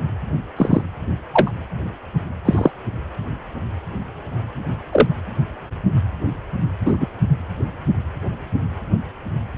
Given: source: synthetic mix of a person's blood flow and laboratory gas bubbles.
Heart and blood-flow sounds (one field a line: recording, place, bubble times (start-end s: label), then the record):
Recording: Doppler ultrasound of blood flow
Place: precordium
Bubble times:
0.57-0.82 s: bubbles
1.32-1.51 s: bubbles
2.45-2.71 s: bubbles
4.92-5.08 s: bubbles
6.85-7.08 s: bubbles
From the record:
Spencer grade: 2 (many but less than half of the cardiac periods contain bubble signals, singularly or in groups)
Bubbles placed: anywhere in the cardiac cycle